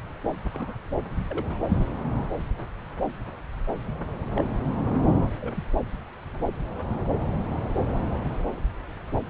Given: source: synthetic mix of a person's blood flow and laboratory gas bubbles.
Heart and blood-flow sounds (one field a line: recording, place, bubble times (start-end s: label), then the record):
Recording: Doppler ultrasound of blood flow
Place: subclavian vein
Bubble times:
0.53-0.77 s: bubbles
1.30-1.44 s: bubbles
1.50-1.58 s: bubbles
4.35-4.42 s: bubbles
5.38-5.62 s: bubbles
From the record:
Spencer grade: 2 (many but less than half of the cardiac periods contain bubble signals, singularly or in groups)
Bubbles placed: anywhere in the cardiac cycle